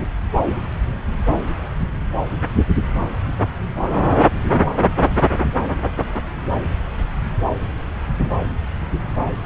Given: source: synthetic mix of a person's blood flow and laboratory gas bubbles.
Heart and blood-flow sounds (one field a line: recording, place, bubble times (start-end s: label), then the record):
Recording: Doppler ultrasound of blood flow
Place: subclavian vein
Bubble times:
no bubbles
From the record:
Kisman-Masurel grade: 000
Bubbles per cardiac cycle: 0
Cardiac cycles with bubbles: 0%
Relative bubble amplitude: no bubbles discernible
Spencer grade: 0 (complete lack of bubble signals)